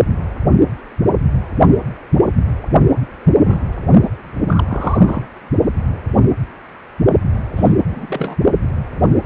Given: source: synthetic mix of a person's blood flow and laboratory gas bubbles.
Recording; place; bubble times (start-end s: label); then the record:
Doppler ultrasound of blood flow; precordium
3.00-3.07 s: bubbles
3.35-3.67 s: bubbles
4.03-4.10 s: bubbles
4.47-5.29 s: bubbles
7.55-7.74 s: bubbles
7.88-8.36 s: bubbles
From the record:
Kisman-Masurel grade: 222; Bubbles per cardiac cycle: several, 3 to 8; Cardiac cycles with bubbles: 10 to 50%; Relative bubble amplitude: moderate (0.250 to 0.450); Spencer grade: 2 (many but less than half of the cardiac periods contain bubble signals, singularly or in groups); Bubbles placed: only in the low amplitude regions of the cardiac cycle